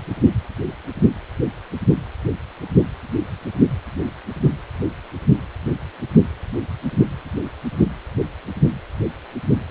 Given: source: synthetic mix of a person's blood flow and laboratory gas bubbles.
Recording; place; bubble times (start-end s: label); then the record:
Doppler ultrasound of blood flow; precordium
no bubbles
From the record:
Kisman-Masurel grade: 000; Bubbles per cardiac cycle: 0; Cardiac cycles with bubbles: 0%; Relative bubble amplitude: no bubbles discernible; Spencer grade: 0 (complete lack of bubble signals)